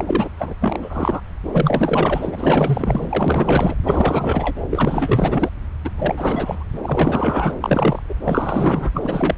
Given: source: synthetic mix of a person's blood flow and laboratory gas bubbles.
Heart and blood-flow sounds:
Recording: Doppler ultrasound of blood flow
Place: subclavian vein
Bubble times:
0.00-0.29 s: bubbles
0.37-0.55 s: bubbles
0.60-1.21 s: bubbles
1.52-3.75 s: bubbles
3.83-4.56 s: bubbles
4.70-5.50 s: bubbles
5.84-5.90 s: bubbles
5.98-6.64 s: bubbles
6.73-6.79 s: bubbles
6.82-7.55 s: bubbles
7.60-8.03 s: bubbles
8.08-8.14 s: bubbles
8.24-8.90 s: bubbles
8.94-9.36 s: bubbles
From the record:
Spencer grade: 4 (maximum detectable bubble signal sounding continuously throughout systole and diastole of every cardiac period, and overriding the amplitude of the normal cardiac signals)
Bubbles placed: anywhere in the cardiac cycle

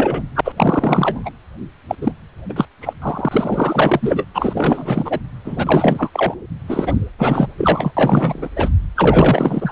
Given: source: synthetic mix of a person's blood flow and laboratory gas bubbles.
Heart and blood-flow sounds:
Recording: Doppler ultrasound of blood flow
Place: precordium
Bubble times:
0.00-0.24 s: bubbles
0.35-0.41 s: bubbles
0.44-0.53 s: bubbles
0.57-1.30 s: bubbles
1.88-1.96 s: bubbles
2.01-2.12 s: bubbles
2.49-2.65 s: bubbles
2.81-2.93 s: bubbles
3.02-4.25 s: bubbles
4.34-5.20 s: bubbles
5.44-6.09 s: bubbles
6.13-6.34 s: bubbles
6.67-6.99 s: bubbles
7.18-7.48 s: bubbles
7.57-7.91 s: bubbles
7.96-8.48 s: bubbles
8.55-8.69 s: bubbles
8.96-9.72 s: bubbles
From the record:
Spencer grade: 4 (maximum detectable bubble signal sounding continuously throughout systole and diastole of every cardiac period, and overriding the amplitude of the normal cardiac signals)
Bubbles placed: anywhere in the cardiac cycle

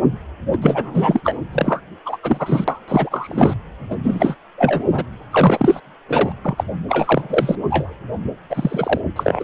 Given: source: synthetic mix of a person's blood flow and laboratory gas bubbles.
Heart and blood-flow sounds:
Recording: Doppler ultrasound of blood flow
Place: precordium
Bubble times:
0.52-0.57 s: bubbles
0.61-1.21 s: bubbles
1.24-1.36 s: bubbles
1.52-1.81 s: bubbles
2.06-2.17 s: bubbles
2.23-2.65 s: bubbles
2.67-2.79 s: bubbles
2.88-3.56 s: bubbles
3.91-3.96 s: bubbles
4.03-4.36 s: bubbles
4.58-4.84 s: bubbles
4.87-5.07 s: bubbles
5.31-5.80 s: bubbles
6.08-6.32 s: bubbles
6.43-6.64 s: bubbles
6.88-7.55 s: bubbles
7.68-7.96 s: bubbles
8.49-9.00 s: bubbles
9.15-9.44 s: bubbles
From the record:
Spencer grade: 3 (all of the cardiac periods contain showers or single bubble signals, but not dominating or overriding the cardiac motion signals)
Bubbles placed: anywhere in the cardiac cycle

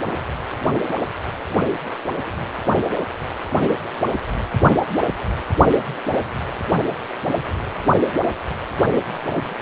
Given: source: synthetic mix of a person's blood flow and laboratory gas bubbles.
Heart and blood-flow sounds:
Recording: Doppler ultrasound of blood flow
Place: precordium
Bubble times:
no bubbles
From the record:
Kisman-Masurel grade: 000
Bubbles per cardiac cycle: 0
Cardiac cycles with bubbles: 0%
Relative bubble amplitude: no bubbles discernible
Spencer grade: 0 (complete lack of bubble signals)

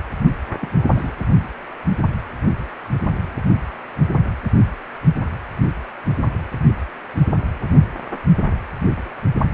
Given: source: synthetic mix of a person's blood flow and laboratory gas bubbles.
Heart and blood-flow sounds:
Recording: Doppler ultrasound of blood flow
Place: precordium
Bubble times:
0.61-0.68 s: bubbles
0.95-1.12 s: bubbles
From the record:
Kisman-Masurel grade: 121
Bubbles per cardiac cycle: 1 to 2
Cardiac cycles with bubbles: 10 to 50%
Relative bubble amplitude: barely perceptible (0.100 to 0.250)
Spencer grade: 2 (many but less than half of the cardiac periods contain bubble signals, singularly or in groups)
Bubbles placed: anywhere in the cardiac cycle

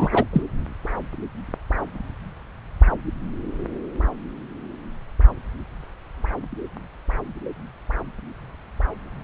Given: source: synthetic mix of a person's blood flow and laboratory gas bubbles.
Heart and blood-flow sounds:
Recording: Doppler ultrasound of blood flow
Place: subclavian vein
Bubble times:
0.00-0.09 s: bubbles
0.12-0.24 s: bubbles
0.33-0.43 s: bubbles
From the record:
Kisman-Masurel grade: 213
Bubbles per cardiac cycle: several, 3 to 8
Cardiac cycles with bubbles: 1 to 10%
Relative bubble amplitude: loud (0.450 to 0.775)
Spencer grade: 1 (occasional bubble signal discernible with the cardiac motion signal, with majority of cardiac periods free of bubbles)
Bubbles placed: anywhere in the cardiac cycle

